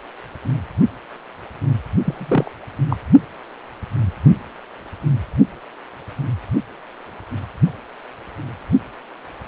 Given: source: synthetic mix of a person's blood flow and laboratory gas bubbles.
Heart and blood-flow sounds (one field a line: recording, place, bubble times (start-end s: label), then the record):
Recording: Doppler ultrasound of blood flow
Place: precordium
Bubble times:
2.04-2.51 s: bubbles
2.88-2.96 s: bubbles
From the record:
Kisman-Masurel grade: 212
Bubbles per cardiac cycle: several, 3 to 8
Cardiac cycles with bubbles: 1 to 10%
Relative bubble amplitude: moderate (0.250 to 0.450)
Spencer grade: 1 (occasional bubble signal discernible with the cardiac motion signal, with majority of cardiac periods free of bubbles)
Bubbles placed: only in the low amplitude regions of the cardiac cycle